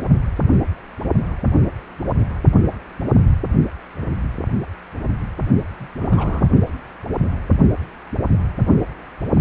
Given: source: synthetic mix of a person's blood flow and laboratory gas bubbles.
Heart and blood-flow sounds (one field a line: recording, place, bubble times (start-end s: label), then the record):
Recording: Doppler ultrasound of blood flow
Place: precordium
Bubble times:
5.80-5.88 s: bubbles
5.98-6.49 s: bubbles
From the record:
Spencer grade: 1 (occasional bubble signal discernible with the cardiac motion signal, with majority of cardiac periods free of bubbles)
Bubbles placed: only in the low amplitude regions of the cardiac cycle